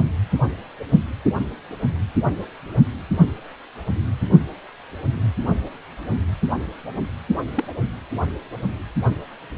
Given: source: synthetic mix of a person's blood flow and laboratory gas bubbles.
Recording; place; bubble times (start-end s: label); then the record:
Doppler ultrasound of blood flow; precordium
7.55-7.64 s: bubbles
From the record:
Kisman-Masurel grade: 111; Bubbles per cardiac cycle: 1 to 2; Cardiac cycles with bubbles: 1 to 10%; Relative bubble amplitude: barely perceptible (0.100 to 0.250); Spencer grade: 1 (occasional bubble signal discernible with the cardiac motion signal, with majority of cardiac periods free of bubbles); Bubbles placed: only in the low amplitude regions of the cardiac cycle